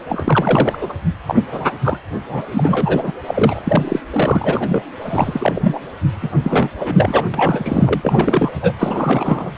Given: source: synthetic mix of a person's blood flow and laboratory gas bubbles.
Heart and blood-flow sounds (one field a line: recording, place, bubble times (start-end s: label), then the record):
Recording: Doppler ultrasound of blood flow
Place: precordium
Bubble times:
0.08-0.78 s: bubbles
0.81-0.92 s: bubbles
1.27-1.41 s: bubbles
1.52-1.71 s: bubbles
1.84-1.98 s: bubbles
2.29-2.42 s: bubbles
2.50-3.12 s: bubbles
3.27-3.62 s: bubbles
3.65-3.99 s: bubbles
4.12-4.83 s: bubbles
5.02-5.79 s: bubbles
6.22-6.29 s: bubbles
6.44-6.70 s: bubbles
6.79-7.25 s: bubbles
7.33-8.51 s: bubbles
8.61-8.73 s: bubbles
8.79-9.51 s: bubbles
From the record:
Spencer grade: 3 (all of the cardiac periods contain showers or single bubble signals, but not dominating or overriding the cardiac motion signals)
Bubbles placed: anywhere in the cardiac cycle